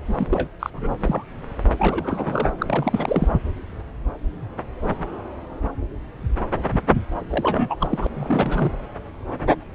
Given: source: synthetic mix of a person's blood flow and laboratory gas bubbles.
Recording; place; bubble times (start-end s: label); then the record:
Doppler ultrasound of blood flow; subclavian vein
0.06-0.48 s: bubbles
0.59-0.70 s: bubbles
0.74-0.92 s: bubbles
1.00-1.24 s: bubbles
1.77-2.51 s: bubbles
2.58-3.28 s: bubbles
7.30-7.75 s: bubbles
7.79-8.07 s: bubbles
8.15-8.73 s: bubbles
From the record:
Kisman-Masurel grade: 332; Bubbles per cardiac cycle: rolling drumbeat, 9 or more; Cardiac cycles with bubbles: 50 to 99%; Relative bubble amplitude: moderate (0.250 to 0.450); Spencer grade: 3 (all of the cardiac periods contain showers or single bubble signals, but not dominating or overriding the cardiac motion signals); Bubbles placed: anywhere in the cardiac cycle